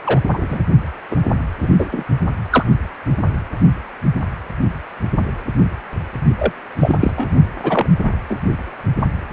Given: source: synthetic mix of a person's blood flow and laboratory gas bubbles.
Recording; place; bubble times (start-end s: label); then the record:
Doppler ultrasound of blood flow; precordium
0.05-0.21 s: bubbles
0.33-0.64 s: bubbles
1.11-1.17 s: bubbles
1.61-2.04 s: bubbles
2.50-2.65 s: bubbles
6.38-6.53 s: bubbles
6.79-7.33 s: bubbles
7.63-7.87 s: bubbles
8.04-8.11 s: bubbles
8.28-8.40 s: bubbles
From the record:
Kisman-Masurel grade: 223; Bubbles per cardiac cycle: several, 3 to 8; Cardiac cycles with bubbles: 10 to 50%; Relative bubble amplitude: loud (0.450 to 0.775); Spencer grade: 2 (many but less than half of the cardiac periods contain bubble signals, singularly or in groups); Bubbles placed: only in the low amplitude regions of the cardiac cycle